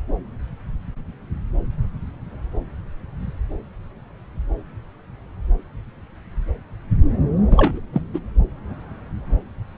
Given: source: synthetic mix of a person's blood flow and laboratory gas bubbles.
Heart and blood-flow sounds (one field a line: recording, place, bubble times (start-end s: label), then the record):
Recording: Doppler ultrasound of blood flow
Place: subclavian vein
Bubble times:
7.50-7.80 s: bubbles
7.92-8.01 s: bubbles
8.13-8.19 s: bubbles
From the record:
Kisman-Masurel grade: 213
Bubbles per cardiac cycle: several, 3 to 8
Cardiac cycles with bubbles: 1 to 10%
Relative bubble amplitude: loud (0.450 to 0.775)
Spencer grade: 1 (occasional bubble signal discernible with the cardiac motion signal, with majority of cardiac periods free of bubbles)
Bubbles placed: anywhere in the cardiac cycle